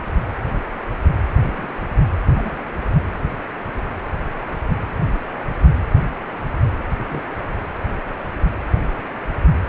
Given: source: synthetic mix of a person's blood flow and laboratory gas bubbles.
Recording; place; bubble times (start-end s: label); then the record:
Doppler ultrasound of blood flow; precordium
1.51-1.67 s: bubbles
2.38-2.65 s: bubbles
3.58-3.83 s: bubbles
7.09-7.21 s: bubbles
From the record:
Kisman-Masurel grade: 121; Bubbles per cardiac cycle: 1 to 2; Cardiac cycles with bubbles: 10 to 50%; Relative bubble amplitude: barely perceptible (0.100 to 0.250); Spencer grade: 2 (many but less than half of the cardiac periods contain bubble signals, singularly or in groups); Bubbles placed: anywhere in the cardiac cycle